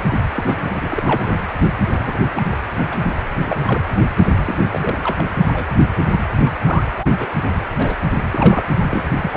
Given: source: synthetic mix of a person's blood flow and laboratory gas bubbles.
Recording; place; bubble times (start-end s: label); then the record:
Doppler ultrasound of blood flow; precordium
0.35-1.40 s: bubbles
1.90-2.19 s: bubbles
2.34-2.42 s: bubbles
2.52-2.56 s: bubbles
2.78-2.86 s: bubbles
2.90-2.98 s: bubbles
3.04-3.23 s: bubbles
3.46-3.57 s: bubbles
3.67-3.83 s: bubbles
4.46-4.54 s: bubbles
4.71-5.25 s: bubbles
5.48-5.71 s: bubbles
6.09-6.20 s: bubbles
6.42-7.10 s: bubbles
7.19-7.29 s: bubbles
7.78-7.95 s: bubbles
8.30-8.64 s: bubbles
8.89-9.05 s: bubbles
9.16-9.37 s: bubbles
From the record:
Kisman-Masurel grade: 242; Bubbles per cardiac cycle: several, 3 to 8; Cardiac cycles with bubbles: 100%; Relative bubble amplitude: moderate (0.250 to 0.450); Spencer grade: 3 (all of the cardiac periods contain showers or single bubble signals, but not dominating or overriding the cardiac motion signals); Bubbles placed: anywhere in the cardiac cycle